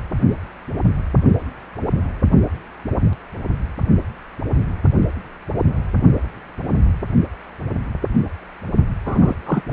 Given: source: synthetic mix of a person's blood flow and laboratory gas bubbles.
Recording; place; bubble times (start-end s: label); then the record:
Doppler ultrasound of blood flow; precordium
9.05-9.36 s: bubbles
9.46-9.61 s: bubbles
9.70-9.73 s: bubbles
From the record:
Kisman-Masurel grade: 222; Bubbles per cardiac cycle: several, 3 to 8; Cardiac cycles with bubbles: 10 to 50%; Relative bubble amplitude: moderate (0.250 to 0.450); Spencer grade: 2 (many but less than half of the cardiac periods contain bubble signals, singularly or in groups); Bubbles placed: only in the low amplitude regions of the cardiac cycle